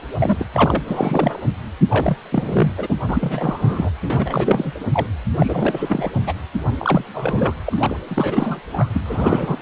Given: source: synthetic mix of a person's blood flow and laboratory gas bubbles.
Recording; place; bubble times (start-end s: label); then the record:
Doppler ultrasound of blood flow; precordium
0.00-0.05 s: bubbles
0.20-0.46 s: bubbles
0.53-0.82 s: bubbles
0.86-1.42 s: bubbles
1.90-2.17 s: bubbles
2.32-2.71 s: bubbles
2.77-2.86 s: bubbles
2.89-2.96 s: bubbles
3.08-3.90 s: bubbles
4.03-4.72 s: bubbles
4.92-5.07 s: bubbles
5.38-6.10 s: bubbles
6.26-6.33 s: bubbles
6.78-7.05 s: bubbles
7.14-7.54 s: bubbles
7.66-7.97 s: bubbles
8.09-8.61 s: bubbles
8.73-9.01 s: bubbles
9.05-9.62 s: bubbles
From the record:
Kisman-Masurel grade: 342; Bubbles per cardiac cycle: rolling drumbeat, 9 or more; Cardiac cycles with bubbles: 100%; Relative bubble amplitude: moderate (0.250 to 0.450); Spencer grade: 3 (all of the cardiac periods contain showers or single bubble signals, but not dominating or overriding the cardiac motion signals); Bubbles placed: anywhere in the cardiac cycle